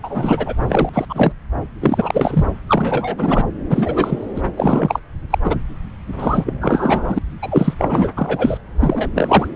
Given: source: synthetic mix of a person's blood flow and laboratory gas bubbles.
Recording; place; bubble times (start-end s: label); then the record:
Doppler ultrasound of blood flow; subclavian vein
0.03-0.54 s: bubbles
0.69-0.90 s: bubbles
0.92-1.05 s: bubbles
1.09-1.32 s: bubbles
1.80-2.46 s: bubbles
2.67-3.46 s: bubbles
3.69-4.24 s: bubbles
4.35-4.42 s: bubbles
4.57-5.00 s: bubbles
5.30-5.38 s: bubbles
5.43-5.55 s: bubbles
6.12-7.18 s: bubbles
7.42-7.74 s: bubbles
7.78-8.08 s: bubbles
8.16-8.57 s: bubbles
8.80-9.09 s: bubbles
9.14-9.48 s: bubbles
From the record:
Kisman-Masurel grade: 343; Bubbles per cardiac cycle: rolling drumbeat, 9 or more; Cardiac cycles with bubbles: 100%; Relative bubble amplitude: loud (0.450 to 0.775); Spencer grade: 3 (all of the cardiac periods contain showers or single bubble signals, but not dominating or overriding the cardiac motion signals); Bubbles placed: anywhere in the cardiac cycle